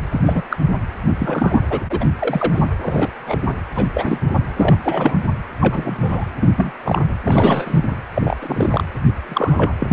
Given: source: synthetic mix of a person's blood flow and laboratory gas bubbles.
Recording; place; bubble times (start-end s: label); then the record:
Doppler ultrasound of blood flow; precordium
0.11-0.20 s: bubbles
0.26-0.42 s: bubbles
0.50-0.56 s: bubbles
1.07-1.14 s: bubbles
1.19-1.62 s: bubbles
1.70-1.80 s: bubbles
1.90-2.06 s: bubbles
2.17-2.64 s: bubbles
2.81-3.10 s: bubbles
3.20-3.50 s: bubbles
3.75-3.88 s: bubbles
3.94-4.18 s: bubbles
4.56-4.77 s: bubbles
4.84-5.29 s: bubbles
5.60-6.25 s: bubbles
6.40-6.52 s: bubbles
6.57-6.72 s: bubbles
6.85-7.02 s: bubbles
7.27-7.98 s: bubbles
8.14-8.37 s: bubbles
8.41-8.84 s: bubbles
9.23-9.75 s: bubbles
9.79-9.93 s: bubbles
From the record:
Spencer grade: 3 (all of the cardiac periods contain showers or single bubble signals, but not dominating or overriding the cardiac motion signals); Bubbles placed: anywhere in the cardiac cycle